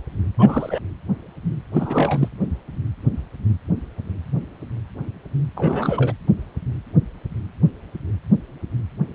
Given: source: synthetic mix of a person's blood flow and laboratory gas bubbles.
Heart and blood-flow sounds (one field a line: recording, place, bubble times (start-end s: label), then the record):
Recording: Doppler ultrasound of blood flow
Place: precordium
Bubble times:
0.39-0.80 s: bubbles
1.72-2.28 s: bubbles
5.55-6.12 s: bubbles
From the record:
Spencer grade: 2 (many but less than half of the cardiac periods contain bubble signals, singularly or in groups)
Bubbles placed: anywhere in the cardiac cycle